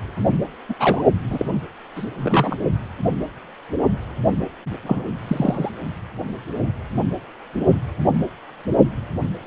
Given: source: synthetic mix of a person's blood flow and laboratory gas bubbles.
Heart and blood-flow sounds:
Doppler ultrasound of blood flow; precordium
0.69-0.74 s: bubbles
0.79-1.02 s: bubbles
1.30-1.51 s: bubbles
1.95-2.10 s: bubbles
2.18-2.57 s: bubbles
4.83-5.10 s: bubbles
5.28-5.71 s: bubbles
From the record:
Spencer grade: 2 (many but less than half of the cardiac periods contain bubble signals, singularly or in groups); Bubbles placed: only in the low amplitude regions of the cardiac cycle

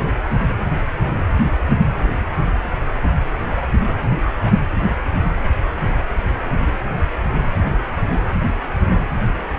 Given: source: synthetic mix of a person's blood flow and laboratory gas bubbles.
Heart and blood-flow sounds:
Doppler ultrasound of blood flow; precordium
0.00-0.10 s: bubbles
0.20-0.30 s: bubbles
From the record:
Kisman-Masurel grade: 211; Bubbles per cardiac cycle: several, 3 to 8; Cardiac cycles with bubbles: 1 to 10%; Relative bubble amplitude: barely perceptible (0.100 to 0.250); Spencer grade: 1 (occasional bubble signal discernible with the cardiac motion signal, with majority of cardiac periods free of bubbles); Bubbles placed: anywhere in the cardiac cycle

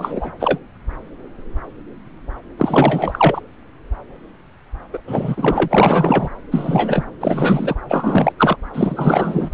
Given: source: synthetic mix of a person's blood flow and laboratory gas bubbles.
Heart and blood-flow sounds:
Doppler ultrasound of blood flow; subclavian vein
0.00-0.30 s: bubbles
0.40-0.59 s: bubbles
2.58-3.41 s: bubbles
4.93-4.98 s: bubbles
5.07-6.29 s: bubbles
6.51-7.04 s: bubbles
7.21-7.75 s: bubbles
7.88-8.33 s: bubbles
8.38-8.56 s: bubbles
8.73-9.50 s: bubbles
From the record:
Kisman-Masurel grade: 333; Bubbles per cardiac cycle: rolling drumbeat, 9 or more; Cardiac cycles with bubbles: 50 to 99%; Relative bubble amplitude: loud (0.450 to 0.775); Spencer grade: 3 (all of the cardiac periods contain showers or single bubble signals, but not dominating or overriding the cardiac motion signals); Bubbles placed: anywhere in the cardiac cycle

